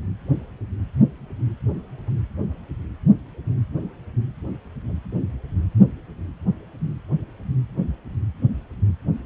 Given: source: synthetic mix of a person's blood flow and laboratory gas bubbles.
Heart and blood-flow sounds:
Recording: Doppler ultrasound of blood flow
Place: precordium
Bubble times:
no bubbles
From the record:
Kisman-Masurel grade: 000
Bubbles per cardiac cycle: 0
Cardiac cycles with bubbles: 0%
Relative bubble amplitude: no bubbles discernible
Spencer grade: 0 (complete lack of bubble signals)

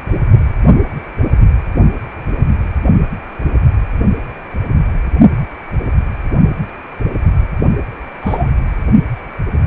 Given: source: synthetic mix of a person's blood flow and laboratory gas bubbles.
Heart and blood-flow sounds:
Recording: Doppler ultrasound of blood flow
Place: precordium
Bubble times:
8.21-8.52 s: bubbles
From the record:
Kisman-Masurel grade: 112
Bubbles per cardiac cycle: 1 to 2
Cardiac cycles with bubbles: 1 to 10%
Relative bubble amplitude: moderate (0.250 to 0.450)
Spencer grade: 1 (occasional bubble signal discernible with the cardiac motion signal, with majority of cardiac periods free of bubbles)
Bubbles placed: only in the low amplitude regions of the cardiac cycle

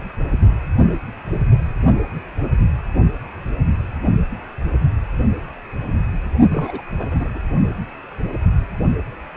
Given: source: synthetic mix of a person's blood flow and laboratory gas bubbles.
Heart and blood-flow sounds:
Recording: Doppler ultrasound of blood flow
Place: precordium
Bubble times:
6.50-6.82 s: bubbles
6.99-7.08 s: bubbles
7.10-7.29 s: bubbles
7.33-7.42 s: bubbles
From the record:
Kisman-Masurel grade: 211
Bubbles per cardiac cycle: several, 3 to 8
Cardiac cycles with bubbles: 1 to 10%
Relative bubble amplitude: barely perceptible (0.100 to 0.250)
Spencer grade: 1 (occasional bubble signal discernible with the cardiac motion signal, with majority of cardiac periods free of bubbles)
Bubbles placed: only in the low amplitude regions of the cardiac cycle

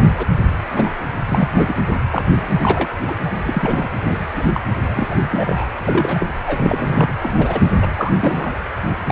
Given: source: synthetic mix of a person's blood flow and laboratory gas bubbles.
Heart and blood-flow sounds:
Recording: Doppler ultrasound of blood flow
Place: precordium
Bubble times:
0.17-0.27 s: bubbles
0.72-0.91 s: bubbles
1.29-1.65 s: bubbles
1.68-1.75 s: bubbles
2.10-2.22 s: bubbles
2.62-2.88 s: bubbles
3.03-3.15 s: bubbles
3.24-3.31 s: bubbles
3.43-3.89 s: bubbles
4.04-4.17 s: bubbles
4.36-4.43 s: bubbles
4.54-4.60 s: bubbles
4.95-5.16 s: bubbles
5.30-5.71 s: bubbles
5.85-6.24 s: bubbles
6.47-7.14 s: bubbles
7.21-7.60 s: bubbles
7.82-7.87 s: bubbles
7.95-8.13 s: bubbles
8.22-8.51 s: bubbles
9.07-9.11 s: bubbles
From the record:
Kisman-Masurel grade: 242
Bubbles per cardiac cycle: several, 3 to 8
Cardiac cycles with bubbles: 100%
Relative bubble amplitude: moderate (0.250 to 0.450)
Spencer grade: 3 (all of the cardiac periods contain showers or single bubble signals, but not dominating or overriding the cardiac motion signals)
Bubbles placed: anywhere in the cardiac cycle

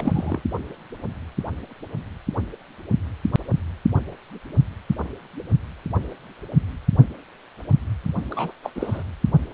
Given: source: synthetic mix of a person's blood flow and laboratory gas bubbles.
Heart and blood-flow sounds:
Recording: Doppler ultrasound of blood flow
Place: precordium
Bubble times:
0.00-0.43 s: bubbles
8.31-8.51 s: bubbles
8.63-8.71 s: bubbles
8.75-9.03 s: bubbles
From the record:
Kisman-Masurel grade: 222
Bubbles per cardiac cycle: several, 3 to 8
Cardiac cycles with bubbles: 10 to 50%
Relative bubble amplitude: moderate (0.250 to 0.450)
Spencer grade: 2 (many but less than half of the cardiac periods contain bubble signals, singularly or in groups)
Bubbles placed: only in the low amplitude regions of the cardiac cycle

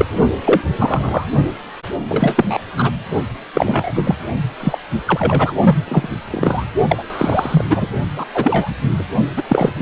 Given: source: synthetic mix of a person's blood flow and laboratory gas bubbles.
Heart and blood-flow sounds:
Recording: Doppler ultrasound of blood flow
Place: precordium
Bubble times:
0.00-0.06 s: bubbles
0.44-0.61 s: bubbles
0.77-1.25 s: bubbles
2.08-2.58 s: bubbles
2.77-2.91 s: bubbles
3.53-3.92 s: bubbles
3.95-4.16 s: bubbles
4.60-4.78 s: bubbles
5.06-5.56 s: bubbles
5.63-5.77 s: bubbles
5.88-6.08 s: bubbles
6.30-6.65 s: bubbles
6.88-7.04 s: bubbles
7.10-7.65 s: bubbles
7.69-7.87 s: bubbles
8.16-8.25 s: bubbles
8.34-8.71 s: bubbles
8.98-9.04 s: bubbles
9.37-9.43 s: bubbles
9.48-9.71 s: bubbles
9.74-9.82 s: bubbles
From the record:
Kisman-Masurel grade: 243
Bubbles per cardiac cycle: several, 3 to 8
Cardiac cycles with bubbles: 100%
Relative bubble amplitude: loud (0.450 to 0.775)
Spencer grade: 3 (all of the cardiac periods contain showers or single bubble signals, but not dominating or overriding the cardiac motion signals)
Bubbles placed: only in the low amplitude regions of the cardiac cycle

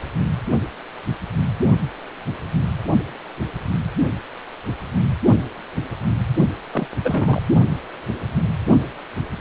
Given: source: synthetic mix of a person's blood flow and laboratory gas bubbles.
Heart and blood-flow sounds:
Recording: Doppler ultrasound of blood flow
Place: precordium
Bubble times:
6.71-6.87 s: bubbles
7.04-7.41 s: bubbles
From the record:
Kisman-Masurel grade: 212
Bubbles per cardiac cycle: several, 3 to 8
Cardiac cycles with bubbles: 1 to 10%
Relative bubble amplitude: moderate (0.250 to 0.450)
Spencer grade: 1 (occasional bubble signal discernible with the cardiac motion signal, with majority of cardiac periods free of bubbles)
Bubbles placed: only in the low amplitude regions of the cardiac cycle

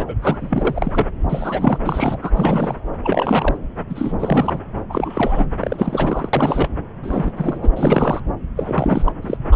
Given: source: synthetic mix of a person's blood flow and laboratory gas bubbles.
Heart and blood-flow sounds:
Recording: Doppler ultrasound of blood flow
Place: subclavian vein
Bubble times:
0.00-0.15 s: bubbles
0.21-1.06 s: bubbles
1.29-1.79 s: bubbles
1.85-2.18 s: bubbles
2.22-2.31 s: bubbles
2.36-2.77 s: bubbles
3.03-3.57 s: bubbles
3.89-4.15 s: bubbles
4.19-4.59 s: bubbles
4.89-5.46 s: bubbles
5.60-6.29 s: bubbles
6.33-6.68 s: bubbles
7.03-7.32 s: bubbles
7.36-7.68 s: bubbles
7.76-8.21 s: bubbles
8.56-9.12 s: bubbles
9.22-9.37 s: bubbles
9.51-9.55 s: bubbles
From the record:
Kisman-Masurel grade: 342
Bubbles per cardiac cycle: rolling drumbeat, 9 or more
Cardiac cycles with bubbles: 100%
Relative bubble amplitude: moderate (0.250 to 0.450)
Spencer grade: 3 (all of the cardiac periods contain showers or single bubble signals, but not dominating or overriding the cardiac motion signals)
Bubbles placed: anywhere in the cardiac cycle

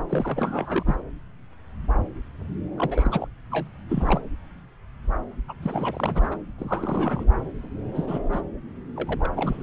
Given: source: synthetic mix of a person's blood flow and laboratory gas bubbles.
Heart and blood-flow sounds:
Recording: Doppler ultrasound of blood flow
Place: subclavian vein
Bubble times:
0.09-0.83 s: bubbles
0.86-0.95 s: bubbles
2.77-3.27 s: bubbles
3.51-3.68 s: bubbles
3.89-4.21 s: bubbles
5.48-5.54 s: bubbles
5.62-6.38 s: bubbles
6.58-7.26 s: bubbles
7.93-8.21 s: bubbles
8.32-8.41 s: bubbles
8.96-9.30 s: bubbles
9.36-9.63 s: bubbles
From the record:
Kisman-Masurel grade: 332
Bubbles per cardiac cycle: rolling drumbeat, 9 or more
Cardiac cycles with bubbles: 50 to 99%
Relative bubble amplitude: moderate (0.250 to 0.450)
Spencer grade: 3 (all of the cardiac periods contain showers or single bubble signals, but not dominating or overriding the cardiac motion signals)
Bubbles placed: anywhere in the cardiac cycle

